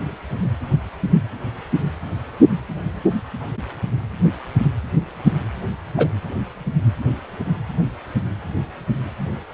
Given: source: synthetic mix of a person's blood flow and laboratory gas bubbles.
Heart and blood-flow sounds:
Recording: Doppler ultrasound of blood flow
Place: precordium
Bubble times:
5.97-6.08 s: bubbles
From the record:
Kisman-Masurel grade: 113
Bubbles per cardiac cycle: 1 to 2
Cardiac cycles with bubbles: 1 to 10%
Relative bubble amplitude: loud (0.450 to 0.775)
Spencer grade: 1 (occasional bubble signal discernible with the cardiac motion signal, with majority of cardiac periods free of bubbles)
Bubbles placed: anywhere in the cardiac cycle

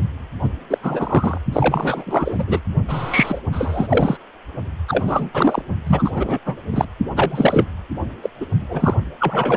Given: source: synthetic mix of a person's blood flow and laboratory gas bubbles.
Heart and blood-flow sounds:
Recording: Doppler ultrasound of blood flow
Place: precordium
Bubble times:
0.43-0.49 s: bubbles
0.70-0.78 s: bubbles
0.83-1.38 s: bubbles
1.52-2.59 s: bubbles
2.88-3.40 s: bubbles
3.52-4.17 s: bubbles
4.88-5.29 s: bubbles
5.33-5.62 s: bubbles
5.87-6.11 s: bubbles
6.14-6.40 s: bubbles
6.46-6.55 s: bubbles
6.72-6.87 s: bubbles
7.16-7.66 s: bubbles
8.22-8.29 s: bubbles
8.40-8.46 s: bubbles
8.60-8.94 s: bubbles
9.19-9.57 s: bubbles
From the record:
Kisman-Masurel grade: 343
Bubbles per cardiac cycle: rolling drumbeat, 9 or more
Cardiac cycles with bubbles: 100%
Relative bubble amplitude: loud (0.450 to 0.775)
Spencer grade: 3 (all of the cardiac periods contain showers or single bubble signals, but not dominating or overriding the cardiac motion signals)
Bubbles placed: only in the low amplitude regions of the cardiac cycle

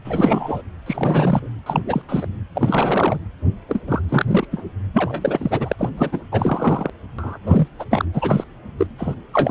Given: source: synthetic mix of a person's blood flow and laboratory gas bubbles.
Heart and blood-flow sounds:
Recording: Doppler ultrasound of blood flow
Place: precordium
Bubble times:
0.04-0.62 s: bubbles
0.86-1.48 s: bubbles
1.66-1.82 s: bubbles
1.86-2.01 s: bubbles
2.08-2.27 s: bubbles
2.54-3.18 s: bubbles
3.68-3.81 s: bubbles
3.87-4.00 s: bubbles
4.09-4.47 s: bubbles
4.51-4.64 s: bubbles
4.93-5.90 s: bubbles
5.97-6.21 s: bubbles
6.31-6.90 s: bubbles
7.18-7.38 s: bubbles
7.44-7.67 s: bubbles
7.79-7.85 s: bubbles
7.90-8.05 s: bubbles
8.13-8.44 s: bubbles
8.78-8.87 s: bubbles
8.98-9.15 s: bubbles
9.33-9.51 s: bubbles
From the record:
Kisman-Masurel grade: 343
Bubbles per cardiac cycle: rolling drumbeat, 9 or more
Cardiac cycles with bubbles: 100%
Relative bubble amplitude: loud (0.450 to 0.775)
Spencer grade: 3 (all of the cardiac periods contain showers or single bubble signals, but not dominating or overriding the cardiac motion signals)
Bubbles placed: anywhere in the cardiac cycle

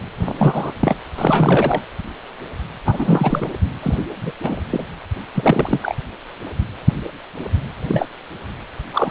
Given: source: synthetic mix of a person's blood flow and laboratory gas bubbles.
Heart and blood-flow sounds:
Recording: Doppler ultrasound of blood flow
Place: precordium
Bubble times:
0.17-0.33 s: bubbles
0.38-0.72 s: bubbles
0.80-0.96 s: bubbles
1.18-1.81 s: bubbles
2.85-3.49 s: bubbles
3.82-4.03 s: bubbles
4.21-4.31 s: bubbles
4.42-4.60 s: bubbles
4.70-4.85 s: bubbles
5.34-5.80 s: bubbles
5.83-5.97 s: bubbles
7.88-8.07 s: bubbles
8.93-9.11 s: bubbles
From the record:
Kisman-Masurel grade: 232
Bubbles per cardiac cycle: several, 3 to 8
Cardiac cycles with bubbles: 50 to 99%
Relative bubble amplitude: moderate (0.250 to 0.450)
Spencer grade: 3 (all of the cardiac periods contain showers or single bubble signals, but not dominating or overriding the cardiac motion signals)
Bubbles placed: anywhere in the cardiac cycle

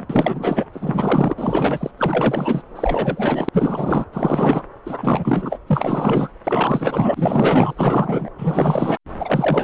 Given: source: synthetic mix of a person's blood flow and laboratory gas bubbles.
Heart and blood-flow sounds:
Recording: Doppler ultrasound of blood flow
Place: subclavian vein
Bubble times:
0.00-0.07 s: bubbles
0.10-0.65 s: bubbles
0.73-1.33 s: bubbles
1.36-1.91 s: bubbles
1.98-2.62 s: bubbles
2.75-3.49 s: bubbles
3.52-4.04 s: bubbles
4.13-4.62 s: bubbles
4.86-5.58 s: bubbles
5.67-6.30 s: bubbles
6.44-7.74 s: bubbles
7.76-8.30 s: bubbles
8.38-8.97 s: bubbles
9.19-9.64 s: bubbles
From the record:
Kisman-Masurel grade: 444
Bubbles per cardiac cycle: continuous sound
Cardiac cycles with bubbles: 100%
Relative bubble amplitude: maximal (0.775 to 0.999)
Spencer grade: 4 (maximum detectable bubble signal sounding continuously throughout systole and diastole of every cardiac period, and overriding the amplitude of the normal cardiac signals)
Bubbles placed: anywhere in the cardiac cycle

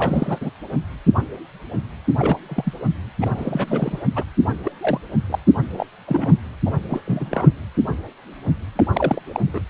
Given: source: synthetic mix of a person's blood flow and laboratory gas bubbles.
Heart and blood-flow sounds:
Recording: Doppler ultrasound of blood flow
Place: precordium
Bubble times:
0.00-0.50 s: bubbles
2.18-2.38 s: bubbles
2.48-2.73 s: bubbles
3.21-4.02 s: bubbles
4.15-4.23 s: bubbles
4.64-4.72 s: bubbles
4.80-5.00 s: bubbles
5.29-5.38 s: bubbles
5.73-5.87 s: bubbles
6.07-6.35 s: bubbles
6.65-6.77 s: bubbles
6.88-7.00 s: bubbles
7.06-7.52 s: bubbles
8.75-8.86 s: bubbles
8.95-9.21 s: bubbles
9.32-9.40 s: bubbles
9.47-9.62 s: bubbles
From the record:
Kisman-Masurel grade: 232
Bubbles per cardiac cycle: several, 3 to 8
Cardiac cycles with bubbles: 50 to 99%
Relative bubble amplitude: moderate (0.250 to 0.450)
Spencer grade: 3 (all of the cardiac periods contain showers or single bubble signals, but not dominating or overriding the cardiac motion signals)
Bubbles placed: anywhere in the cardiac cycle

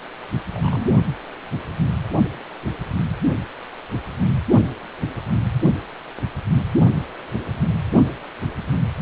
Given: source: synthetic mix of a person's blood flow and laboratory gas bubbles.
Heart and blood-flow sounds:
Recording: Doppler ultrasound of blood flow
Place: precordium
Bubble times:
0.52-0.89 s: bubbles
From the record:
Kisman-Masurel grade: 121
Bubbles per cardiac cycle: 1 to 2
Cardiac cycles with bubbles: 10 to 50%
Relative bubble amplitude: barely perceptible (0.100 to 0.250)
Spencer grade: 2 (many but less than half of the cardiac periods contain bubble signals, singularly or in groups)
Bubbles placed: only in the low amplitude regions of the cardiac cycle

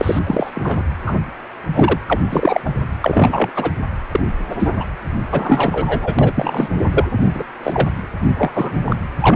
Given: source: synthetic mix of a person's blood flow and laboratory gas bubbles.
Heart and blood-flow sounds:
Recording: Doppler ultrasound of blood flow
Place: precordium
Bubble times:
0.01-0.19 s: bubbles
0.27-0.51 s: bubbles
0.55-0.83 s: bubbles
1.05-1.17 s: bubbles
1.74-1.99 s: bubbles
2.06-2.19 s: bubbles
2.31-2.60 s: bubbles
2.65-2.70 s: bubbles
3.01-3.50 s: bubbles
3.55-3.72 s: bubbles
4.12-4.20 s: bubbles
4.50-4.55 s: bubbles
4.59-4.70 s: bubbles
4.78-4.85 s: bubbles
5.32-6.15 s: bubbles
6.19-6.68 s: bubbles
6.92-7.04 s: bubbles
7.34-7.43 s: bubbles
7.63-7.88 s: bubbles
8.34-8.50 s: bubbles
8.55-8.77 s: bubbles
8.85-8.96 s: bubbles
9.20-9.36 s: bubbles
From the record:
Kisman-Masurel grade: 243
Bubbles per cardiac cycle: several, 3 to 8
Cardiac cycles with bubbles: 100%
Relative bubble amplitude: loud (0.450 to 0.775)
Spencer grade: 3 (all of the cardiac periods contain showers or single bubble signals, but not dominating or overriding the cardiac motion signals)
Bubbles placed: anywhere in the cardiac cycle

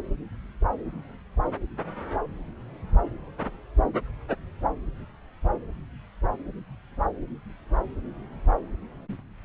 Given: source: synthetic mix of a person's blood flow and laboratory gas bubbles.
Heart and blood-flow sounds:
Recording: Doppler ultrasound of blood flow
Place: subclavian vein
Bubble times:
no bubbles
From the record:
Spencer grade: 0 (complete lack of bubble signals)

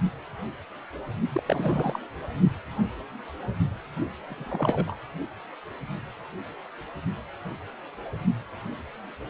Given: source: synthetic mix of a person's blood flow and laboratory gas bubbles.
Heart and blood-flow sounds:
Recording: Doppler ultrasound of blood flow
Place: precordium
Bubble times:
1.33-1.42 s: bubbles
1.46-1.99 s: bubbles
4.30-4.34 s: bubbles
4.37-4.95 s: bubbles
From the record:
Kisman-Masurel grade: 221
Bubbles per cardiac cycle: several, 3 to 8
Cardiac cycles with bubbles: 10 to 50%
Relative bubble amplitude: barely perceptible (0.100 to 0.250)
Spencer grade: 2 (many but less than half of the cardiac periods contain bubble signals, singularly or in groups)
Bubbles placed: only in the low amplitude regions of the cardiac cycle

